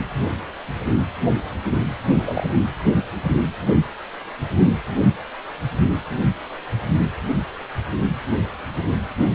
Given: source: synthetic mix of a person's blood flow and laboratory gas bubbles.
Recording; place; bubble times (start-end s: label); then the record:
Doppler ultrasound of blood flow; precordium
1.69-1.78 s: bubbles
2.12-2.47 s: bubbles
From the record:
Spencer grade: 2 (many but less than half of the cardiac periods contain bubble signals, singularly or in groups); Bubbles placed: only in the low amplitude regions of the cardiac cycle